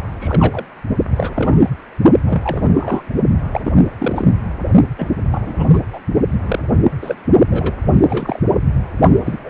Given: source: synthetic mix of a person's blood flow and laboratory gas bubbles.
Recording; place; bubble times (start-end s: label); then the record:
Doppler ultrasound of blood flow; precordium
0.20-0.66 s: bubbles
1.16-1.70 s: bubbles
2.26-3.03 s: bubbles
3.52-3.60 s: bubbles
3.64-3.73 s: bubbles
3.98-4.28 s: bubbles
4.98-5.08 s: bubbles
5.30-5.68 s: bubbles
5.72-5.79 s: bubbles
5.93-6.00 s: bubbles
6.46-6.59 s: bubbles
7.01-7.15 s: bubbles
7.50-7.74 s: bubbles
7.85-8.40 s: bubbles
9.25-9.50 s: bubbles
From the record:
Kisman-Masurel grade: 232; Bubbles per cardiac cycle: several, 3 to 8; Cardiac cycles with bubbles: 50 to 99%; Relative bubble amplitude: moderate (0.250 to 0.450); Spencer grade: 3 (all of the cardiac periods contain showers or single bubble signals, but not dominating or overriding the cardiac motion signals); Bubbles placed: only in the low amplitude regions of the cardiac cycle